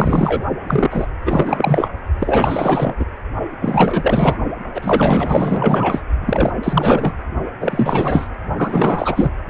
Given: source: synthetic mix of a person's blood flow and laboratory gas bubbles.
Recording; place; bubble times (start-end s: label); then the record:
Doppler ultrasound of blood flow; precordium
0.00-0.45 s: bubbles
0.68-1.06 s: bubbles
1.25-1.89 s: bubbles
2.18-2.94 s: bubbles
2.99-3.05 s: bubbles
3.61-4.37 s: bubbles
4.74-6.02 s: bubbles
6.21-6.51 s: bubbles
6.63-7.14 s: bubbles
7.60-8.28 s: bubbles
8.56-9.32 s: bubbles
From the record:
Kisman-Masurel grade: 444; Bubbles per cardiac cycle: continuous sound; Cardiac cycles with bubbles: 100%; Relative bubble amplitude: maximal (0.775 to 0.999); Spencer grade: 4 (maximum detectable bubble signal sounding continuously throughout systole and diastole of every cardiac period, and overriding the amplitude of the normal cardiac signals); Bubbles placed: only in the low amplitude regions of the cardiac cycle